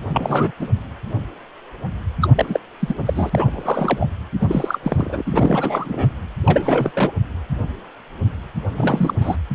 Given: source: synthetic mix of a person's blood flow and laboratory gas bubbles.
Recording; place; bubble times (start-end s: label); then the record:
Doppler ultrasound of blood flow; precordium
0.09-0.51 s: bubbles
0.58-0.68 s: bubbles
2.22-2.28 s: bubbles
2.35-2.60 s: bubbles
2.79-2.95 s: bubbles
3.06-4.07 s: bubbles
4.40-4.79 s: bubbles
4.82-5.22 s: bubbles
5.26-6.10 s: bubbles
6.44-6.92 s: bubbles
6.94-7.11 s: bubbles
8.76-9.37 s: bubbles
From the record:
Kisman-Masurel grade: 332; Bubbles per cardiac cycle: rolling drumbeat, 9 or more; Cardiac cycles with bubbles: 50 to 99%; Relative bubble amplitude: moderate (0.250 to 0.450); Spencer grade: 3 (all of the cardiac periods contain showers or single bubble signals, but not dominating or overriding the cardiac motion signals); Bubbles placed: anywhere in the cardiac cycle